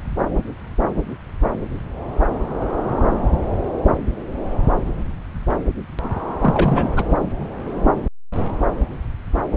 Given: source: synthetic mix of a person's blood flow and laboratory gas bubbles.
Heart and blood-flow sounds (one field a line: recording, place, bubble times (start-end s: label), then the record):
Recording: Doppler ultrasound of blood flow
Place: subclavian vein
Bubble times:
6.40-7.04 s: bubbles
From the record:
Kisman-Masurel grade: 212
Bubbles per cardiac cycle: several, 3 to 8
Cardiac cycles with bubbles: 1 to 10%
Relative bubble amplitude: moderate (0.250 to 0.450)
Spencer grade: 1 (occasional bubble signal discernible with the cardiac motion signal, with majority of cardiac periods free of bubbles)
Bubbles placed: anywhere in the cardiac cycle